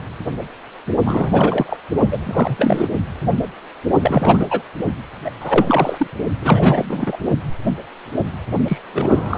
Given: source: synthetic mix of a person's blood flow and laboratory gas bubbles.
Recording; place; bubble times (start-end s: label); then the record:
Doppler ultrasound of blood flow; precordium
1.04-1.77 s: bubbles
2.11-2.88 s: bubbles
4.00-4.62 s: bubbles
5.25-5.30 s: bubbles
5.40-6.07 s: bubbles
6.41-7.18 s: bubbles
8.68-8.78 s: bubbles
8.94-9.38 s: bubbles
From the record:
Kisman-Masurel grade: 333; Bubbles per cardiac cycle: rolling drumbeat, 9 or more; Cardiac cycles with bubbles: 50 to 99%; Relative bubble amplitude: loud (0.450 to 0.775); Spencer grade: 3 (all of the cardiac periods contain showers or single bubble signals, but not dominating or overriding the cardiac motion signals); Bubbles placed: only in the low amplitude regions of the cardiac cycle